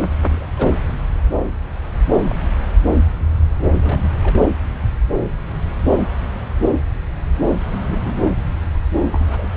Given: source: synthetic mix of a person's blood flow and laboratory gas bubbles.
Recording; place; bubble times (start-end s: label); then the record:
Doppler ultrasound of blood flow; subclavian vein
0.20-0.47 s: bubbles
0.57-0.81 s: bubbles
2.23-2.37 s: bubbles
3.63-3.72 s: bubbles
3.75-4.40 s: bubbles
7.90-8.38 s: bubbles
8.75-8.79 s: bubbles
8.96-9.04 s: bubbles
9.12-9.48 s: bubbles
From the record:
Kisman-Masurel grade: 221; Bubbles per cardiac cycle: several, 3 to 8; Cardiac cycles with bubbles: 10 to 50%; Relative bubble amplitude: barely perceptible (0.100 to 0.250); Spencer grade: 2 (many but less than half of the cardiac periods contain bubble signals, singularly or in groups); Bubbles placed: anywhere in the cardiac cycle